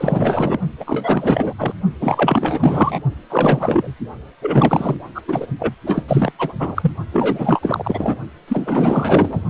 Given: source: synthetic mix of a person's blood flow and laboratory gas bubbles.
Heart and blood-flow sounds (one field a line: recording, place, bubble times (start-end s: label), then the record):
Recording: Doppler ultrasound of blood flow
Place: precordium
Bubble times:
0.00-0.59 s: bubbles
0.79-1.53 s: bubbles
1.58-1.73 s: bubbles
2.00-2.99 s: bubbles
3.30-3.94 s: bubbles
4.41-4.96 s: bubbles
5.14-5.21 s: bubbles
5.27-5.47 s: bubbles
5.58-5.75 s: bubbles
5.85-6.03 s: bubbles
6.07-6.32 s: bubbles
6.38-6.54 s: bubbles
6.59-6.92 s: bubbles
7.12-8.15 s: bubbles
8.47-9.40 s: bubbles
From the record:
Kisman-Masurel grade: 444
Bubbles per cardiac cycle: continuous sound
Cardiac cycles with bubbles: 100%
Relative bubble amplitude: maximal (0.775 to 0.999)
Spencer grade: 4 (maximum detectable bubble signal sounding continuously throughout systole and diastole of every cardiac period, and overriding the amplitude of the normal cardiac signals)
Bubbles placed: only in the low amplitude regions of the cardiac cycle